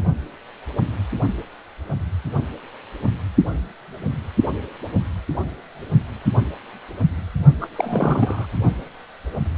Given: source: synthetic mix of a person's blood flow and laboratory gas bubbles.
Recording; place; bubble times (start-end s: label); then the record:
Doppler ultrasound of blood flow; precordium
7.61-7.68 s: bubbles
7.76-8.47 s: bubbles
From the record:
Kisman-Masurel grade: 212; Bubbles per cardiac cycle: several, 3 to 8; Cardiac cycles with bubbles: 1 to 10%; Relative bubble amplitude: moderate (0.250 to 0.450); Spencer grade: 1 (occasional bubble signal discernible with the cardiac motion signal, with majority of cardiac periods free of bubbles); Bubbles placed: only in the low amplitude regions of the cardiac cycle